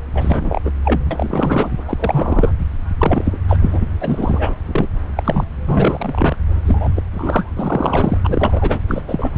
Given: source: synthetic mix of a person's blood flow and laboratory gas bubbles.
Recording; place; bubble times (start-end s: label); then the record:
Doppler ultrasound of blood flow; subclavian vein
0.14-0.61 s: bubbles
0.65-0.70 s: bubbles
0.85-1.00 s: bubbles
1.10-1.69 s: bubbles
1.88-2.52 s: bubbles
2.99-3.40 s: bubbles
3.48-3.58 s: bubbles
3.61-3.90 s: bubbles
4.00-4.55 s: bubbles
4.68-4.87 s: bubbles
5.17-5.44 s: bubbles
5.65-6.36 s: bubbles
6.67-6.89 s: bubbles
6.96-7.02 s: bubbles
7.11-8.18 s: bubbles
8.24-8.79 s: bubbles
8.88-9.04 s: bubbles
9.08-9.29 s: bubbles
From the record:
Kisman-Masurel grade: 342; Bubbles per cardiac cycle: rolling drumbeat, 9 or more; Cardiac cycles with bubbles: 100%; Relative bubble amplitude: moderate (0.250 to 0.450); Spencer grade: 3 (all of the cardiac periods contain showers or single bubble signals, but not dominating or overriding the cardiac motion signals); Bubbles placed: anywhere in the cardiac cycle